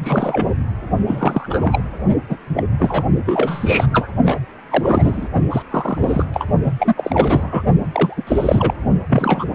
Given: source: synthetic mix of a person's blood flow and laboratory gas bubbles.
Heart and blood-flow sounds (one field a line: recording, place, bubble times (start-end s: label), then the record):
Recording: Doppler ultrasound of blood flow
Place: precordium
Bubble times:
0.03-0.47 s: bubbles
1.07-1.84 s: bubbles
2.29-2.36 s: bubbles
2.54-2.63 s: bubbles
2.79-3.04 s: bubbles
3.26-3.87 s: bubbles
3.93-4.07 s: bubbles
4.25-4.39 s: bubbles
4.70-5.28 s: bubbles
5.50-5.62 s: bubbles
5.70-6.25 s: bubbles
6.33-6.46 s: bubbles
6.65-6.95 s: bubbles
6.98-7.62 s: bubbles
7.92-8.23 s: bubbles
8.27-8.74 s: bubbles
9.09-9.46 s: bubbles
From the record:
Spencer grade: 3 (all of the cardiac periods contain showers or single bubble signals, but not dominating or overriding the cardiac motion signals)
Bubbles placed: only in the low amplitude regions of the cardiac cycle